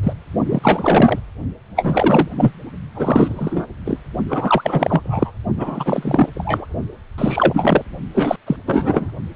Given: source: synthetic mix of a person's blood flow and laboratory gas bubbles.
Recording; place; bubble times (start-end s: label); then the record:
Doppler ultrasound of blood flow; precordium
0.03-0.13 s: bubbles
0.47-1.19 s: bubbles
1.76-2.28 s: bubbles
2.37-2.51 s: bubbles
2.94-3.66 s: bubbles
3.85-3.98 s: bubbles
4.29-5.32 s: bubbles
5.57-6.29 s: bubbles
6.35-6.67 s: bubbles
7.17-7.83 s: bubbles
8.14-8.36 s: bubbles
8.46-8.56 s: bubbles
8.67-9.11 s: bubbles
From the record:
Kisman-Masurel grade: 343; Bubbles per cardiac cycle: rolling drumbeat, 9 or more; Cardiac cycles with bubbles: 100%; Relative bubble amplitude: loud (0.450 to 0.775); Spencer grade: 3 (all of the cardiac periods contain showers or single bubble signals, but not dominating or overriding the cardiac motion signals); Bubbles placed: only in the low amplitude regions of the cardiac cycle